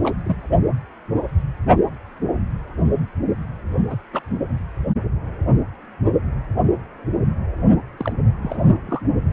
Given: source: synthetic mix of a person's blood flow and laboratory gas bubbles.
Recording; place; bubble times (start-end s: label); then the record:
Doppler ultrasound of blood flow; precordium
0.02-0.17 s: bubbles
0.25-0.41 s: bubbles
3.90-3.97 s: bubbles
4.12-4.21 s: bubbles
7.98-8.12 s: bubbles
8.42-8.79 s: bubbles
8.87-9.02 s: bubbles
From the record:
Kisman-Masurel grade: 221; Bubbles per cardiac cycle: several, 3 to 8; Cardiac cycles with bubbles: 10 to 50%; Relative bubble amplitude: barely perceptible (0.100 to 0.250); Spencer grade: 2 (many but less than half of the cardiac periods contain bubble signals, singularly or in groups); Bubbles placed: only in the low amplitude regions of the cardiac cycle